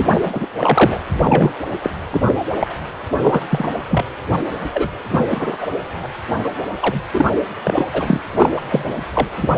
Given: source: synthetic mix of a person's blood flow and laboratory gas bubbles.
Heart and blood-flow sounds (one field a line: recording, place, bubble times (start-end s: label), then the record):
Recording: Doppler ultrasound of blood flow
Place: precordium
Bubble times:
0.00-0.48 s: bubbles
0.57-1.05 s: bubbles
1.14-1.53 s: bubbles
1.82-1.90 s: bubbles
2.10-2.34 s: bubbles
2.55-2.68 s: bubbles
3.18-3.48 s: bubbles
3.50-3.70 s: bubbles
3.89-4.04 s: bubbles
4.74-4.88 s: bubbles
5.10-5.25 s: bubbles
5.30-5.58 s: bubbles
5.61-5.67 s: bubbles
6.03-6.07 s: bubbles
6.44-6.49 s: bubbles
6.79-7.01 s: bubbles
7.13-7.26 s: bubbles
7.64-7.86 s: bubbles
7.93-8.20 s: bubbles
8.29-8.63 s: bubbles
8.70-8.92 s: bubbles
9.13-9.28 s: bubbles
9.37-9.48 s: bubbles
9.54-9.58 s: bubbles
From the record:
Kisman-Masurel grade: 233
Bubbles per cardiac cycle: several, 3 to 8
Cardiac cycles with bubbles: 50 to 99%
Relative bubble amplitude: loud (0.450 to 0.775)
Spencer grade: 3 (all of the cardiac periods contain showers or single bubble signals, but not dominating or overriding the cardiac motion signals)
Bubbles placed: anywhere in the cardiac cycle